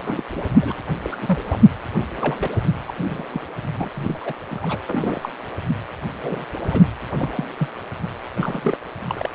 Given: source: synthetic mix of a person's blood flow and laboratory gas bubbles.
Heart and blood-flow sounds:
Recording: Doppler ultrasound of blood flow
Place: precordium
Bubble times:
0.00-0.24 s: bubbles
0.32-0.43 s: bubbles
0.60-0.83 s: bubbles
1.02-1.16 s: bubbles
1.21-1.41 s: bubbles
1.46-1.58 s: bubbles
2.17-2.35 s: bubbles
2.40-2.50 s: bubbles
2.87-2.92 s: bubbles
2.97-3.41 s: bubbles
3.76-3.91 s: bubbles
3.94-4.18 s: bubbles
4.21-4.33 s: bubbles
4.50-4.79 s: bubbles
4.86-5.30 s: bubbles
6.21-6.46 s: bubbles
6.61-6.83 s: bubbles
7.14-7.29 s: bubbles
7.33-7.46 s: bubbles
7.58-7.68 s: bubbles
8.34-8.78 s: bubbles
9.09-9.29 s: bubbles
From the record:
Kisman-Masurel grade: 242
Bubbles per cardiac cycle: several, 3 to 8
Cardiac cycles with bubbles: 100%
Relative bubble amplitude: moderate (0.250 to 0.450)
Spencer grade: 3 (all of the cardiac periods contain showers or single bubble signals, but not dominating or overriding the cardiac motion signals)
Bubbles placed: anywhere in the cardiac cycle

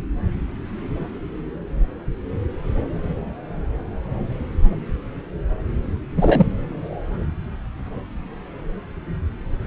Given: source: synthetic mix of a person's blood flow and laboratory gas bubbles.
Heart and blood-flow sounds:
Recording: Doppler ultrasound of blood flow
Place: subclavian vein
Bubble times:
6.17-6.46 s: bubbles
From the record:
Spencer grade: 1 (occasional bubble signal discernible with the cardiac motion signal, with majority of cardiac periods free of bubbles)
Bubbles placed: anywhere in the cardiac cycle

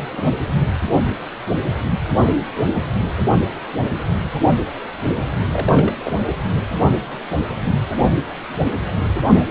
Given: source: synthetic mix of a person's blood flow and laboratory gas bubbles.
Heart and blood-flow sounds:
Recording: Doppler ultrasound of blood flow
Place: precordium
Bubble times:
0.00-0.32 s: bubbles
5.52-5.94 s: bubbles
6.04-6.12 s: bubbles
From the record:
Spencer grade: 1 (occasional bubble signal discernible with the cardiac motion signal, with majority of cardiac periods free of bubbles)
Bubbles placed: anywhere in the cardiac cycle

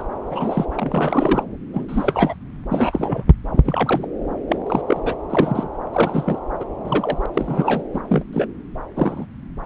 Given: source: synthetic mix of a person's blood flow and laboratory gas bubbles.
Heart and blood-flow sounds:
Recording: Doppler ultrasound of blood flow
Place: subclavian vein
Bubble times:
0.30-0.65 s: bubbles
0.76-1.43 s: bubbles
1.73-1.86 s: bubbles
1.89-2.35 s: bubbles
2.69-3.30 s: bubbles
3.53-4.08 s: bubbles
4.49-4.58 s: bubbles
4.67-4.82 s: bubbles
4.87-5.00 s: bubbles
5.04-5.16 s: bubbles
5.30-5.68 s: bubbles
5.93-6.39 s: bubbles
6.60-6.65 s: bubbles
6.85-7.26 s: bubbles
7.33-7.83 s: bubbles
7.93-8.02 s: bubbles
8.09-8.23 s: bubbles
8.33-8.46 s: bubbles
8.96-9.26 s: bubbles
From the record:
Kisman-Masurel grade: 242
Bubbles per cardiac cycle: several, 3 to 8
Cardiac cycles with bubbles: 100%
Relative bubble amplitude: moderate (0.250 to 0.450)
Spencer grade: 3 (all of the cardiac periods contain showers or single bubble signals, but not dominating or overriding the cardiac motion signals)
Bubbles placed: anywhere in the cardiac cycle

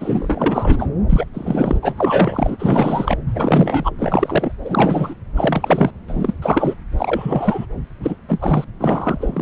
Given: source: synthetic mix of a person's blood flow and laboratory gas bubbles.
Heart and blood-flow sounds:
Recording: Doppler ultrasound of blood flow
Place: subclavian vein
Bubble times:
0.00-0.90 s: bubbles
1.09-1.25 s: bubbles
1.33-1.79 s: bubbles
1.82-1.94 s: bubbles
1.98-3.16 s: bubbles
3.27-3.90 s: bubbles
3.98-4.53 s: bubbles
4.65-5.14 s: bubbles
5.36-5.91 s: bubbles
6.08-6.34 s: bubbles
6.42-6.74 s: bubbles
6.97-7.66 s: bubbles
8.00-8.16 s: bubbles
8.28-8.64 s: bubbles
8.79-9.41 s: bubbles
From the record:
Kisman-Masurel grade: 343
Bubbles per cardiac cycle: rolling drumbeat, 9 or more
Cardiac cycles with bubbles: 100%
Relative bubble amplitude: loud (0.450 to 0.775)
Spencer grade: 3 (all of the cardiac periods contain showers or single bubble signals, but not dominating or overriding the cardiac motion signals)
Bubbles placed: anywhere in the cardiac cycle

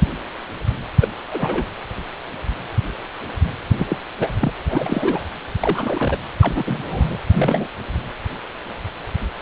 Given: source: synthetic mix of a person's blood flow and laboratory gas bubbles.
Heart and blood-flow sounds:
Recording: Doppler ultrasound of blood flow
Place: precordium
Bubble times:
1.01-1.08 s: bubbles
1.31-1.66 s: bubbles
3.75-3.97 s: bubbles
4.20-4.28 s: bubbles
4.40-4.53 s: bubbles
4.70-5.22 s: bubbles
5.59-6.18 s: bubbles
6.41-7.18 s: bubbles
7.33-7.67 s: bubbles
From the record:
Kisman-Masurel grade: 232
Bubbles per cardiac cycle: several, 3 to 8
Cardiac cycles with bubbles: 50 to 99%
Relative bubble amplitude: moderate (0.250 to 0.450)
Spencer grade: 3 (all of the cardiac periods contain showers or single bubble signals, but not dominating or overriding the cardiac motion signals)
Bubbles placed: anywhere in the cardiac cycle

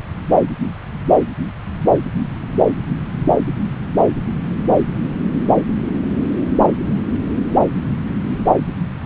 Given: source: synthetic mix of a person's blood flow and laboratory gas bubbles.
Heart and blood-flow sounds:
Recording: Doppler ultrasound of blood flow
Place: subclavian vein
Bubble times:
no bubbles
From the record:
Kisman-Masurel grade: 000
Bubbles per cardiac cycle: 0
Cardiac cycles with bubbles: 0%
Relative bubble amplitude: no bubbles discernible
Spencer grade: 0 (complete lack of bubble signals)

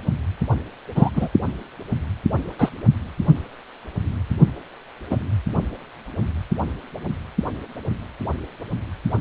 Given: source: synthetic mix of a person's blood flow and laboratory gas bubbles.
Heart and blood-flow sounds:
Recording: Doppler ultrasound of blood flow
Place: precordium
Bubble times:
0.95-1.10 s: bubbles
1.15-1.29 s: bubbles
2.59-2.69 s: bubbles
5.10-5.17 s: bubbles
From the record:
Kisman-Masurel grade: 123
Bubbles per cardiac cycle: 1 to 2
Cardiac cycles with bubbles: 10 to 50%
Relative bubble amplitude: loud (0.450 to 0.775)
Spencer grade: 2 (many but less than half of the cardiac periods contain bubble signals, singularly or in groups)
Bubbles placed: only in the low amplitude regions of the cardiac cycle

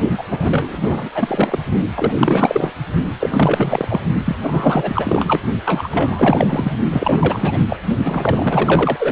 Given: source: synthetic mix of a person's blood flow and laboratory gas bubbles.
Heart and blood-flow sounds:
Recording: Doppler ultrasound of blood flow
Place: precordium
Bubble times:
0.17-0.23 s: bubbles
0.29-0.77 s: bubbles
0.83-1.59 s: bubbles
1.96-2.73 s: bubbles
3.20-4.00 s: bubbles
4.25-4.36 s: bubbles
4.43-5.42 s: bubbles
5.64-6.72 s: bubbles
6.90-7.76 s: bubbles
8.04-9.11 s: bubbles
From the record:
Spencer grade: 4 (maximum detectable bubble signal sounding continuously throughout systole and diastole of every cardiac period, and overriding the amplitude of the normal cardiac signals)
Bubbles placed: only in the low amplitude regions of the cardiac cycle

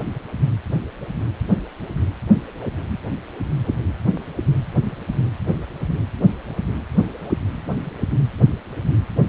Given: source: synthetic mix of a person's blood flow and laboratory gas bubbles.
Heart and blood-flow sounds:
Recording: Doppler ultrasound of blood flow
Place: precordium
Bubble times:
no bubbles
From the record:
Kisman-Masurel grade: 000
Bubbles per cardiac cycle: 0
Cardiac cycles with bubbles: 0%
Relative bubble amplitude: no bubbles discernible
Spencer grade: 0 (complete lack of bubble signals)

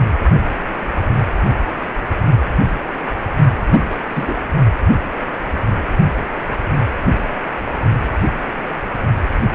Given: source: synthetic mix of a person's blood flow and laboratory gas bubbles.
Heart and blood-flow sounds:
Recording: Doppler ultrasound of blood flow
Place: precordium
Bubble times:
3.70-3.99 s: bubbles
4.08-4.33 s: bubbles
From the record:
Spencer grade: 1 (occasional bubble signal discernible with the cardiac motion signal, with majority of cardiac periods free of bubbles)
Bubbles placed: only in the low amplitude regions of the cardiac cycle

